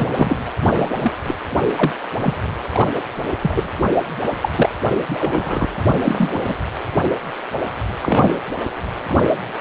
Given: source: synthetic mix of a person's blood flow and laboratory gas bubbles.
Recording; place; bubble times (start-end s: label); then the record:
Doppler ultrasound of blood flow; precordium
0.00-0.45 s: bubbles
0.60-0.93 s: bubbles
1.00-1.14 s: bubbles
1.27-1.35 s: bubbles
1.75-1.92 s: bubbles
2.19-2.34 s: bubbles
2.73-2.94 s: bubbles
3.42-3.68 s: bubbles
4.42-4.49 s: bubbles
4.55-4.70 s: bubbles
5.08-5.66 s: bubbles
5.88-5.95 s: bubbles
6.04-6.56 s: bubbles
8.02-8.36 s: bubbles
9.08-9.31 s: bubbles
From the record:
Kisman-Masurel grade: 233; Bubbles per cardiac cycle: several, 3 to 8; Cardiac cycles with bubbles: 50 to 99%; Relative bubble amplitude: loud (0.450 to 0.775); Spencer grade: 3 (all of the cardiac periods contain showers or single bubble signals, but not dominating or overriding the cardiac motion signals); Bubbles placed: anywhere in the cardiac cycle